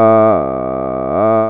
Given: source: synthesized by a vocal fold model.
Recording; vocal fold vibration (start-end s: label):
sustained vowel that changes in the middle
0.00-0.26 s: 110.6 Hz, open quotient 0.29
0.46-1.06 s: 65.4 Hz, open quotient 0.17
1.26-1.50 s: 110.6 Hz, open quotient 0.29